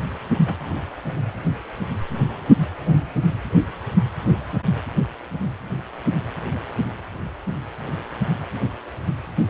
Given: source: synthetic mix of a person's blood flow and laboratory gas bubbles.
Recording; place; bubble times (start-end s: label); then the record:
Doppler ultrasound of blood flow; precordium
0.46-0.54 s: bubbles
From the record:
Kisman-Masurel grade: 112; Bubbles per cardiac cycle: 1 to 2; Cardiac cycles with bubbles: 1 to 10%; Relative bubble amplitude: moderate (0.250 to 0.450); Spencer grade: 1 (occasional bubble signal discernible with the cardiac motion signal, with majority of cardiac periods free of bubbles); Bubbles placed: anywhere in the cardiac cycle